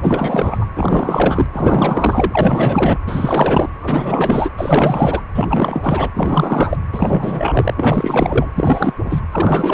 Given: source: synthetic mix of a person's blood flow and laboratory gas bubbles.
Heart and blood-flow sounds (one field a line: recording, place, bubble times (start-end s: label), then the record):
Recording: Doppler ultrasound of blood flow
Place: precordium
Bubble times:
0.02-0.68 s: bubbles
0.75-1.46 s: bubbles
1.52-2.97 s: bubbles
3.06-3.70 s: bubbles
3.81-4.50 s: bubbles
4.57-5.22 s: bubbles
5.34-6.10 s: bubbles
6.15-6.77 s: bubbles
6.92-8.50 s: bubbles
8.55-8.94 s: bubbles
9.04-9.20 s: bubbles
9.31-9.74 s: bubbles
From the record:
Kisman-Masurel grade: 444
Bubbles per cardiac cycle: continuous sound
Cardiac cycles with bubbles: 100%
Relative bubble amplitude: maximal (0.775 to 0.999)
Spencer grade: 4 (maximum detectable bubble signal sounding continuously throughout systole and diastole of every cardiac period, and overriding the amplitude of the normal cardiac signals)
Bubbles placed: anywhere in the cardiac cycle